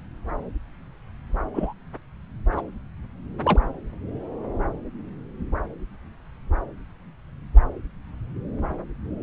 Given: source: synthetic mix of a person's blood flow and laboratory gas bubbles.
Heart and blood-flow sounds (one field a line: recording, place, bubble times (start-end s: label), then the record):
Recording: Doppler ultrasound of blood flow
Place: subclavian vein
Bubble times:
1.53-1.73 s: bubbles
2.52-2.62 s: bubbles
3.43-3.59 s: bubbles
From the record:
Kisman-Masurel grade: 122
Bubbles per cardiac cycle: 1 to 2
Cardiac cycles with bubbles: 10 to 50%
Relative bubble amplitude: moderate (0.250 to 0.450)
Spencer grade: 2 (many but less than half of the cardiac periods contain bubble signals, singularly or in groups)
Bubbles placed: anywhere in the cardiac cycle